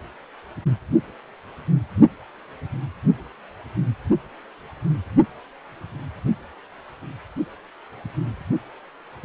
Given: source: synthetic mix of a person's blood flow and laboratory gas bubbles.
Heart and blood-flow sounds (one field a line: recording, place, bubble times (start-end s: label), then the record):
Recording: Doppler ultrasound of blood flow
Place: precordium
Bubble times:
9.23-9.25 s: bubbles
From the record:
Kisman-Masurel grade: 112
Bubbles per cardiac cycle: 1 to 2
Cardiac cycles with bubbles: 1 to 10%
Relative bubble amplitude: moderate (0.250 to 0.450)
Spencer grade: 1 (occasional bubble signal discernible with the cardiac motion signal, with majority of cardiac periods free of bubbles)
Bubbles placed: only in the low amplitude regions of the cardiac cycle